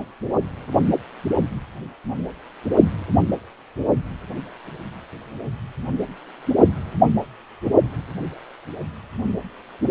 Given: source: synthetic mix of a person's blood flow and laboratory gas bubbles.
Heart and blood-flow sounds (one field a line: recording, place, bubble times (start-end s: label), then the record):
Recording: Doppler ultrasound of blood flow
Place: precordium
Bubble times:
no bubbles
From the record:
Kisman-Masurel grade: 000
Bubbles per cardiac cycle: 0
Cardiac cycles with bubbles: 0%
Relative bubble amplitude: no bubbles discernible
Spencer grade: 0 (complete lack of bubble signals)